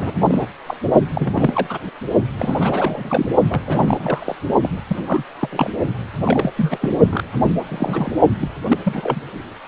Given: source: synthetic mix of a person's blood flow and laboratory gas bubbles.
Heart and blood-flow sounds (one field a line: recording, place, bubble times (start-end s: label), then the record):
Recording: Doppler ultrasound of blood flow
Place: precordium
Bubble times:
0.00-0.15 s: bubbles
0.27-0.49 s: bubbles
0.67-0.77 s: bubbles
1.15-1.78 s: bubbles
2.36-3.29 s: bubbles
3.48-3.62 s: bubbles
3.66-4.36 s: bubbles
4.62-4.70 s: bubbles
4.88-5.24 s: bubbles
5.40-5.70 s: bubbles
6.25-6.52 s: bubbles
6.57-6.99 s: bubbles
7.10-7.24 s: bubbles
7.68-8.20 s: bubbles
8.38-8.48 s: bubbles
8.68-8.79 s: bubbles
8.84-9.20 s: bubbles
From the record:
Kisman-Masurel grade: 342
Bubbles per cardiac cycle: rolling drumbeat, 9 or more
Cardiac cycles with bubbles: 100%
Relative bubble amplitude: moderate (0.250 to 0.450)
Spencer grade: 3 (all of the cardiac periods contain showers or single bubble signals, but not dominating or overriding the cardiac motion signals)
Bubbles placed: only in the low amplitude regions of the cardiac cycle